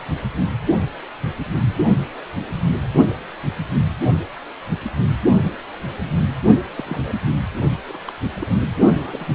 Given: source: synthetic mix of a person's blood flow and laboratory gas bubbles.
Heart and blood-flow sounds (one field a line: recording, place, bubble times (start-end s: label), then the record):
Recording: Doppler ultrasound of blood flow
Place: precordium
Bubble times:
6.78-6.83 s: bubbles
6.87-7.12 s: bubbles
7.88-7.99 s: bubbles
8.06-8.12 s: bubbles
8.36-8.51 s: bubbles
9.00-9.26 s: bubbles
From the record:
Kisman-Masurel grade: 221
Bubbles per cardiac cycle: several, 3 to 8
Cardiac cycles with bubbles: 10 to 50%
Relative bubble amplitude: barely perceptible (0.100 to 0.250)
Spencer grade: 2 (many but less than half of the cardiac periods contain bubble signals, singularly or in groups)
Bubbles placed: only in the low amplitude regions of the cardiac cycle